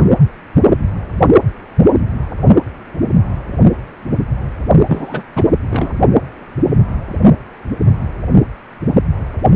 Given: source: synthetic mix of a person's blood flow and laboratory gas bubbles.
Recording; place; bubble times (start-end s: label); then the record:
Doppler ultrasound of blood flow; precordium
4.88-5.23 s: bubbles
5.36-5.44 s: bubbles
5.69-5.93 s: bubbles
From the record:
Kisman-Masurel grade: 222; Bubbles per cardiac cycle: several, 3 to 8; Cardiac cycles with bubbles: 10 to 50%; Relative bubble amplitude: moderate (0.250 to 0.450); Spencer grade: 2 (many but less than half of the cardiac periods contain bubble signals, singularly or in groups); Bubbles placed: only in the low amplitude regions of the cardiac cycle